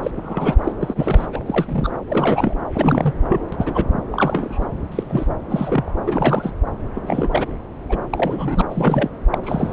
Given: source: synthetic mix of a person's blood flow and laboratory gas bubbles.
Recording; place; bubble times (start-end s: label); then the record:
Doppler ultrasound of blood flow; subclavian vein
0.03-0.11 s: bubbles
0.16-0.57 s: bubbles
0.64-0.72 s: bubbles
0.80-1.27 s: bubbles
1.32-1.43 s: bubbles
1.46-1.91 s: bubbles
2.09-2.55 s: bubbles
2.74-3.15 s: bubbles
3.29-3.40 s: bubbles
3.52-3.56 s: bubbles
3.59-3.86 s: bubbles
4.12-4.66 s: bubbles
4.92-5.27 s: bubbles
5.50-5.90 s: bubbles
6.06-6.51 s: bubbles
6.95-7.29 s: bubbles
7.31-7.46 s: bubbles
7.89-7.98 s: bubbles
8.10-8.62 s: bubbles
8.70-9.09 s: bubbles
9.31-9.38 s: bubbles
9.43-9.73 s: bubbles
From the record:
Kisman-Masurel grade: 242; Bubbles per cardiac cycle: several, 3 to 8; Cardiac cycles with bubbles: 100%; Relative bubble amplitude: moderate (0.250 to 0.450); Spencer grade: 3 (all of the cardiac periods contain showers or single bubble signals, but not dominating or overriding the cardiac motion signals); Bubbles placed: anywhere in the cardiac cycle